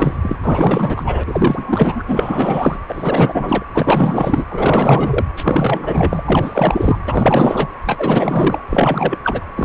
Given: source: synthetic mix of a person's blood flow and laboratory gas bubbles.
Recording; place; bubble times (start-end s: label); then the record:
Doppler ultrasound of blood flow; precordium
0.00-0.17 s: bubbles
0.22-0.36 s: bubbles
0.42-1.24 s: bubbles
1.27-2.03 s: bubbles
2.07-2.76 s: bubbles
2.88-3.63 s: bubbles
3.74-4.45 s: bubbles
4.48-5.25 s: bubbles
5.37-6.98 s: bubbles
7.07-7.68 s: bubbles
7.86-8.61 s: bubbles
8.70-9.17 s: bubbles
9.23-9.41 s: bubbles
9.55-9.65 s: bubbles
From the record:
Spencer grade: 4 (maximum detectable bubble signal sounding continuously throughout systole and diastole of every cardiac period, and overriding the amplitude of the normal cardiac signals); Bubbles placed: anywhere in the cardiac cycle